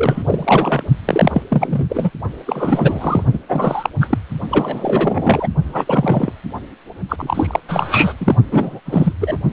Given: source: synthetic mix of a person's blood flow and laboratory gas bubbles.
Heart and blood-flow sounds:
Doppler ultrasound of blood flow; precordium
0.00-0.83 s: bubbles
1.05-1.42 s: bubbles
1.49-1.86 s: bubbles
1.89-2.10 s: bubbles
2.46-3.24 s: bubbles
3.32-3.39 s: bubbles
3.48-3.90 s: bubbles
4.01-4.18 s: bubbles
4.50-5.48 s: bubbles
5.64-6.32 s: bubbles
7.09-7.60 s: bubbles
7.69-8.13 s: bubbles
8.18-8.36 s: bubbles
8.51-8.80 s: bubbles
8.86-9.13 s: bubbles
9.20-9.37 s: bubbles
From the record:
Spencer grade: 3 (all of the cardiac periods contain showers or single bubble signals, but not dominating or overriding the cardiac motion signals); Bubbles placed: only in the low amplitude regions of the cardiac cycle

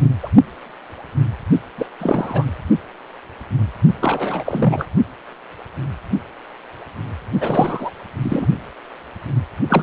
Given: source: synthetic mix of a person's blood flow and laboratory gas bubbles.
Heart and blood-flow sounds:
Doppler ultrasound of blood flow; precordium
0.23-0.29 s: bubbles
1.77-1.86 s: bubbles
1.99-2.46 s: bubbles
4.00-4.85 s: bubbles
7.39-7.91 s: bubbles
8.22-8.46 s: bubbles
9.69-9.83 s: bubbles
From the record:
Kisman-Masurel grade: 332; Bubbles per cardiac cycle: rolling drumbeat, 9 or more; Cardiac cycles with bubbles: 50 to 99%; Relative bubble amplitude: moderate (0.250 to 0.450); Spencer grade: 3 (all of the cardiac periods contain showers or single bubble signals, but not dominating or overriding the cardiac motion signals); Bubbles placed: only in the low amplitude regions of the cardiac cycle

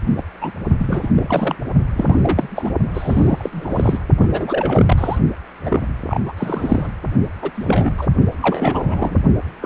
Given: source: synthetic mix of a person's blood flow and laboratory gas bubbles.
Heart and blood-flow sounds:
Doppler ultrasound of blood flow; precordium
0.17-0.23 s: bubbles
0.41-0.52 s: bubbles
0.78-1.09 s: bubbles
1.15-1.56 s: bubbles
1.96-2.72 s: bubbles
2.94-3.49 s: bubbles
3.52-3.98 s: bubbles
4.21-4.28 s: bubbles
4.31-5.19 s: bubbles
5.65-5.87 s: bubbles
6.02-6.33 s: bubbles
6.37-6.90 s: bubbles
7.42-7.50 s: bubbles
7.54-8.08 s: bubbles
8.40-9.18 s: bubbles
9.61-9.66 s: bubbles
From the record:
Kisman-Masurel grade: 342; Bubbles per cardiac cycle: rolling drumbeat, 9 or more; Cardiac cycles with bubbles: 100%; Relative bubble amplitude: moderate (0.250 to 0.450); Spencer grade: 3 (all of the cardiac periods contain showers or single bubble signals, but not dominating or overriding the cardiac motion signals); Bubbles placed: only in the low amplitude regions of the cardiac cycle

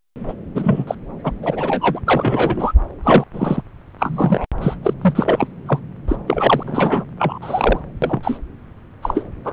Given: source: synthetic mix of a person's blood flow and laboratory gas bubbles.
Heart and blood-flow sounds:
Doppler ultrasound of blood flow; subclavian vein
0.28-0.33 s: bubbles
0.55-0.84 s: bubbles
0.87-0.95 s: bubbles
1.23-1.30 s: bubbles
1.42-2.00 s: bubbles
2.06-2.73 s: bubbles
3.03-3.24 s: bubbles
3.33-3.62 s: bubbles
3.98-4.46 s: bubbles
4.61-4.77 s: bubbles
4.82-4.94 s: bubbles
5.01-5.47 s: bubbles
5.66-5.79 s: bubbles
6.07-6.16 s: bubbles
6.27-7.04 s: bubbles
7.18-7.39 s: bubbles
7.41-7.80 s: bubbles
8.02-8.38 s: bubbles
9.03-9.22 s: bubbles
9.44-9.53 s: bubbles
From the record:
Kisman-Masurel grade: 243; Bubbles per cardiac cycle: several, 3 to 8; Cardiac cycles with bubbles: 100%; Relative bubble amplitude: loud (0.450 to 0.775); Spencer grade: 3 (all of the cardiac periods contain showers or single bubble signals, but not dominating or overriding the cardiac motion signals); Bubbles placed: anywhere in the cardiac cycle

